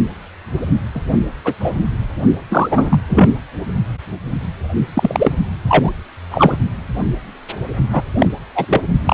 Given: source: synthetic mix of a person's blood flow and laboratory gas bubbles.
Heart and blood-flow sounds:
Doppler ultrasound of blood flow; precordium
0.94-1.02 s: bubbles
1.45-1.54 s: bubbles
1.60-1.71 s: bubbles
2.50-3.01 s: bubbles
3.10-3.30 s: bubbles
4.94-5.32 s: bubbles
5.68-5.91 s: bubbles
6.30-6.57 s: bubbles
7.92-8.01 s: bubbles
8.18-8.29 s: bubbles
8.55-8.81 s: bubbles
9.04-9.14 s: bubbles
From the record:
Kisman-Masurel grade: 233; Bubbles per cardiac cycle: several, 3 to 8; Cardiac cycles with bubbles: 50 to 99%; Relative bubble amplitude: loud (0.450 to 0.775); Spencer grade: 3 (all of the cardiac periods contain showers or single bubble signals, but not dominating or overriding the cardiac motion signals); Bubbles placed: only in the low amplitude regions of the cardiac cycle

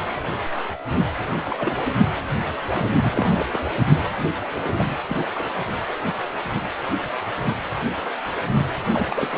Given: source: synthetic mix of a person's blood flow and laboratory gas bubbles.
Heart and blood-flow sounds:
Doppler ultrasound of blood flow; precordium
1.45-1.91 s: bubbles
2.73-2.88 s: bubbles
3.03-3.45 s: bubbles
3.52-3.58 s: bubbles
4.55-4.84 s: bubbles
5.09-5.16 s: bubbles
5.34-5.50 s: bubbles
8.52-8.66 s: bubbles
8.92-9.27 s: bubbles
9.31-9.38 s: bubbles
From the record:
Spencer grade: 2 (many but less than half of the cardiac periods contain bubble signals, singularly or in groups); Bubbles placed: anywhere in the cardiac cycle

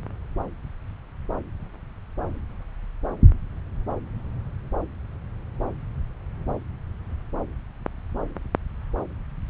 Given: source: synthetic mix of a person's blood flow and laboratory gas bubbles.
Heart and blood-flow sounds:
Doppler ultrasound of blood flow; subclavian vein
no bubbles
From the record:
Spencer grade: 0 (complete lack of bubble signals)

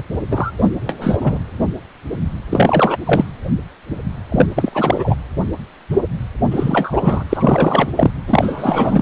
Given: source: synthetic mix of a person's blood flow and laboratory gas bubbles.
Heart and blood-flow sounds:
Doppler ultrasound of blood flow; precordium
0.31-0.52 s: bubbles
0.58-0.70 s: bubbles
0.89-0.94 s: bubbles
1.01-1.40 s: bubbles
2.50-2.96 s: bubbles
3.06-3.25 s: bubbles
4.31-4.46 s: bubbles
4.56-5.14 s: bubbles
6.51-7.24 s: bubbles
7.29-7.90 s: bubbles
7.96-8.11 s: bubbles
8.28-9.02 s: bubbles
From the record:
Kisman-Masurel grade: 333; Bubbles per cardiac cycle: rolling drumbeat, 9 or more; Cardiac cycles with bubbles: 50 to 99%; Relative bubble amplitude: loud (0.450 to 0.775); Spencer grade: 3 (all of the cardiac periods contain showers or single bubble signals, but not dominating or overriding the cardiac motion signals); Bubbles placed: anywhere in the cardiac cycle

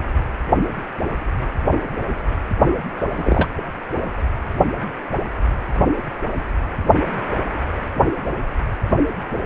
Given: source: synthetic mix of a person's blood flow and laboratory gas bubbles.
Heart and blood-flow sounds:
Doppler ultrasound of blood flow; precordium
3.15-3.48 s: bubbles
From the record:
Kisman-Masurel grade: 112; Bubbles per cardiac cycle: 1 to 2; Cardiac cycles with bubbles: 1 to 10%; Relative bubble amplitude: moderate (0.250 to 0.450); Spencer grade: 1 (occasional bubble signal discernible with the cardiac motion signal, with majority of cardiac periods free of bubbles); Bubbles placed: anywhere in the cardiac cycle

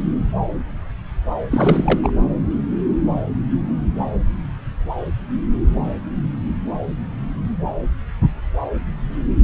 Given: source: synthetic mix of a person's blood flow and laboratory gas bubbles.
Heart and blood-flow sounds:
Doppler ultrasound of blood flow; subclavian vein
1.50-2.01 s: bubbles
2.03-2.12 s: bubbles
From the record:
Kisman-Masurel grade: 222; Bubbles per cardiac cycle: several, 3 to 8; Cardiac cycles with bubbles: 10 to 50%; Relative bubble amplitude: moderate (0.250 to 0.450); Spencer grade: 2 (many but less than half of the cardiac periods contain bubble signals, singularly or in groups); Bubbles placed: anywhere in the cardiac cycle

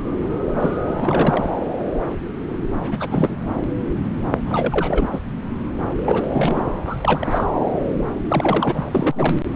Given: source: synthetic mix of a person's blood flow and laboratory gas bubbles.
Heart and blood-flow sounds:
Doppler ultrasound of blood flow; subclavian vein
0.60-0.77 s: bubbles
0.85-1.57 s: bubbles
2.81-3.36 s: bubbles
4.46-5.07 s: bubbles
5.12-5.20 s: bubbles
6.05-6.65 s: bubbles
6.86-7.44 s: bubbles
8.28-8.83 s: bubbles
8.91-9.36 s: bubbles
From the record:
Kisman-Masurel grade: 332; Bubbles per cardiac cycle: rolling drumbeat, 9 or more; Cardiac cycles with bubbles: 50 to 99%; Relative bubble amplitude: moderate (0.250 to 0.450); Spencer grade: 3 (all of the cardiac periods contain showers or single bubble signals, but not dominating or overriding the cardiac motion signals); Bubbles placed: anywhere in the cardiac cycle

